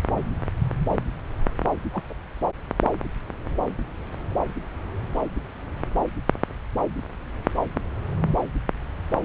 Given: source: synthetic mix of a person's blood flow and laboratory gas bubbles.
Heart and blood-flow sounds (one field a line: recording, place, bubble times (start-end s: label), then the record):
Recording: Doppler ultrasound of blood flow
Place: subclavian vein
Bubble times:
1.92-2.03 s: bubbles
2.10-2.14 s: bubbles
From the record:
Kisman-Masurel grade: 121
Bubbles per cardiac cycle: 1 to 2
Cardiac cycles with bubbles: 10 to 50%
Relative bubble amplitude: barely perceptible (0.100 to 0.250)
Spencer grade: 2 (many but less than half of the cardiac periods contain bubble signals, singularly or in groups)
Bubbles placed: anywhere in the cardiac cycle